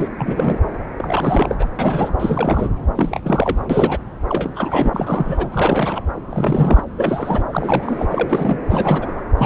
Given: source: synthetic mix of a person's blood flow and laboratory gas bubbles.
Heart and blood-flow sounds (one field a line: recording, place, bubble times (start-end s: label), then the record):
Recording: Doppler ultrasound of blood flow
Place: subclavian vein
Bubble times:
0.00-0.08 s: bubbles
0.18-0.58 s: bubbles
0.96-1.56 s: bubbles
1.59-1.69 s: bubbles
1.78-2.13 s: bubbles
2.19-2.71 s: bubbles
2.96-3.20 s: bubbles
3.23-3.58 s: bubbles
3.69-3.98 s: bubbles
4.29-5.47 s: bubbles
5.52-6.01 s: bubbles
6.29-6.84 s: bubbles
6.97-7.43 s: bubbles
7.52-8.07 s: bubbles
8.09-8.57 s: bubbles
8.70-9.21 s: bubbles
9.37-9.46 s: bubbles
From the record:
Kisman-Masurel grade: 342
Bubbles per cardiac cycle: rolling drumbeat, 9 or more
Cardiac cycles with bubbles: 100%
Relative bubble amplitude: moderate (0.250 to 0.450)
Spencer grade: 3 (all of the cardiac periods contain showers or single bubble signals, but not dominating or overriding the cardiac motion signals)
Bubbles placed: anywhere in the cardiac cycle